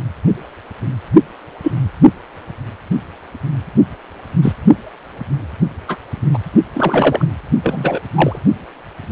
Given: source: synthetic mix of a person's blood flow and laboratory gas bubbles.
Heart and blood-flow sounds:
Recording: Doppler ultrasound of blood flow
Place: precordium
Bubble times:
1.63-1.72 s: bubbles
4.42-4.53 s: bubbles
5.88-5.98 s: bubbles
6.33-6.38 s: bubbles
6.74-7.26 s: bubbles
7.64-8.00 s: bubbles
8.13-8.41 s: bubbles
From the record:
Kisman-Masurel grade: 123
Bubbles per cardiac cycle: 1 to 2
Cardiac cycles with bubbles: 10 to 50%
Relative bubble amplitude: loud (0.450 to 0.775)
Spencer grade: 2 (many but less than half of the cardiac periods contain bubble signals, singularly or in groups)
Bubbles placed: only in the low amplitude regions of the cardiac cycle

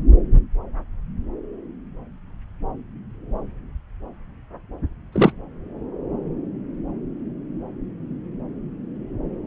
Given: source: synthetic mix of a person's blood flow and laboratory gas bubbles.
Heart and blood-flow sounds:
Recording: Doppler ultrasound of blood flow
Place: subclavian vein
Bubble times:
5.12-5.32 s: bubbles
From the record:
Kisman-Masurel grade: 113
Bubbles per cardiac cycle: 1 to 2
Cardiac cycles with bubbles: 1 to 10%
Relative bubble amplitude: loud (0.450 to 0.775)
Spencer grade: 1 (occasional bubble signal discernible with the cardiac motion signal, with majority of cardiac periods free of bubbles)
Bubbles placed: anywhere in the cardiac cycle

